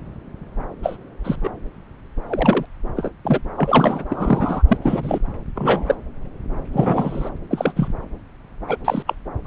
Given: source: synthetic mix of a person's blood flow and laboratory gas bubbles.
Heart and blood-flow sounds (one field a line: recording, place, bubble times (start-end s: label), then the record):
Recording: Doppler ultrasound of blood flow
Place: subclavian vein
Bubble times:
0.82-0.97 s: bubbles
1.24-1.35 s: bubbles
1.43-1.50 s: bubbles
2.28-2.66 s: bubbles
2.96-3.11 s: bubbles
3.24-3.41 s: bubbles
3.58-4.04 s: bubbles
4.09-4.63 s: bubbles
4.67-4.77 s: bubbles
4.82-5.18 s: bubbles
5.55-5.95 s: bubbles
6.72-7.29 s: bubbles
7.50-7.73 s: bubbles
7.76-7.87 s: bubbles
8.67-8.78 s: bubbles
8.85-9.03 s: bubbles
9.07-9.16 s: bubbles
9.44-9.47 s: bubbles
From the record:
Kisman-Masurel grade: 233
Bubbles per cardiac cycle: several, 3 to 8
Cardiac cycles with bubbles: 50 to 99%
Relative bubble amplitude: loud (0.450 to 0.775)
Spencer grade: 3 (all of the cardiac periods contain showers or single bubble signals, but not dominating or overriding the cardiac motion signals)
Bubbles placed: anywhere in the cardiac cycle